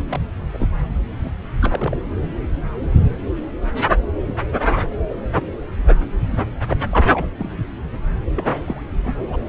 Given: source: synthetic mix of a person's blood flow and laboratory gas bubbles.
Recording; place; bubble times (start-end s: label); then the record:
Doppler ultrasound of blood flow; subclavian vein
0.09-0.20 s: bubbles
0.53-0.68 s: bubbles
1.23-1.31 s: bubbles
1.61-1.97 s: bubbles
6.70-6.77 s: bubbles
6.91-7.10 s: bubbles
7.13-7.27 s: bubbles
7.39-7.50 s: bubbles
8.35-8.81 s: bubbles
9.04-9.14 s: bubbles
9.32-9.37 s: bubbles
9.46-9.48 s: bubbles
From the record:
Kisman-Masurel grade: 222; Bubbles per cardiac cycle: several, 3 to 8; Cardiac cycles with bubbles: 10 to 50%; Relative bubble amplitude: moderate (0.250 to 0.450); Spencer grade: 2 (many but less than half of the cardiac periods contain bubble signals, singularly or in groups); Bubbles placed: anywhere in the cardiac cycle